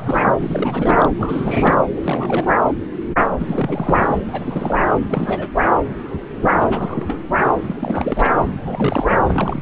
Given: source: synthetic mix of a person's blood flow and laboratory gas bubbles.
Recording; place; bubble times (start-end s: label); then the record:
Doppler ultrasound of blood flow; subclavian vein
0.00-0.26 s: bubbles
0.37-1.08 s: bubbles
1.19-1.75 s: bubbles
1.97-2.46 s: bubbles
3.38-4.25 s: bubbles
4.28-4.85 s: bubbles
5.08-5.50 s: bubbles
6.51-7.19 s: bubbles
7.48-7.52 s: bubbles
7.67-8.30 s: bubbles
8.47-9.07 s: bubbles
9.28-9.62 s: bubbles
From the record:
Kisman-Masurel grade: 332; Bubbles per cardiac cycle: rolling drumbeat, 9 or more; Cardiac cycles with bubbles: 50 to 99%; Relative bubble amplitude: moderate (0.250 to 0.450); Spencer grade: 3 (all of the cardiac periods contain showers or single bubble signals, but not dominating or overriding the cardiac motion signals); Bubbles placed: anywhere in the cardiac cycle